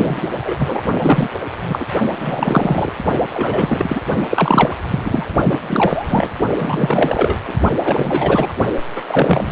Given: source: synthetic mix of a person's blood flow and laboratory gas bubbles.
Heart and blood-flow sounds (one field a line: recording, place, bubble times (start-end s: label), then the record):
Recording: Doppler ultrasound of blood flow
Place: precordium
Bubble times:
0.00-0.81 s: bubbles
0.99-1.29 s: bubbles
1.60-1.86 s: bubbles
2.21-2.91 s: bubbles
3.30-4.01 s: bubbles
4.29-4.76 s: bubbles
4.89-5.26 s: bubbles
5.44-5.58 s: bubbles
5.68-6.31 s: bubbles
6.60-7.36 s: bubbles
7.47-7.53 s: bubbles
7.79-8.52 s: bubbles
8.95-9.02 s: bubbles
9.07-9.51 s: bubbles
From the record:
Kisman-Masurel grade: 343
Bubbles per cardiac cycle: rolling drumbeat, 9 or more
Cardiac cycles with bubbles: 100%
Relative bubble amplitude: loud (0.450 to 0.775)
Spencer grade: 3 (all of the cardiac periods contain showers or single bubble signals, but not dominating or overriding the cardiac motion signals)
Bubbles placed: only in the low amplitude regions of the cardiac cycle